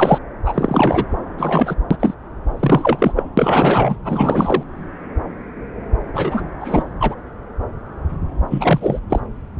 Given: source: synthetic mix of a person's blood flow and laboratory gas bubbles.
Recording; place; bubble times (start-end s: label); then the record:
Doppler ultrasound of blood flow; subclavian vein
0.00-0.18 s: bubbles
0.44-1.05 s: bubbles
1.38-1.75 s: bubbles
1.91-2.14 s: bubbles
2.60-3.12 s: bubbles
3.16-3.23 s: bubbles
3.37-3.97 s: bubbles
4.04-4.63 s: bubbles
6.13-6.44 s: bubbles
6.60-6.83 s: bubbles
7.00-7.15 s: bubbles
8.50-8.99 s: bubbles
9.09-9.20 s: bubbles
From the record:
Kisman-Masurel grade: 233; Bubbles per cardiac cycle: several, 3 to 8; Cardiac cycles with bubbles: 50 to 99%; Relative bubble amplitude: loud (0.450 to 0.775); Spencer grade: 3 (all of the cardiac periods contain showers or single bubble signals, but not dominating or overriding the cardiac motion signals); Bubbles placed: anywhere in the cardiac cycle